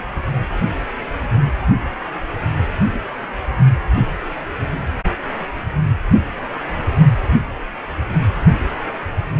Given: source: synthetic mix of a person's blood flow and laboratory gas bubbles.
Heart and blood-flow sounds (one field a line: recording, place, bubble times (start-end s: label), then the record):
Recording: Doppler ultrasound of blood flow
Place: precordium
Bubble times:
no bubbles
From the record:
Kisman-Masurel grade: 000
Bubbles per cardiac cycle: 0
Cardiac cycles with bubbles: 0%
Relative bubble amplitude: no bubbles discernible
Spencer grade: 0 (complete lack of bubble signals)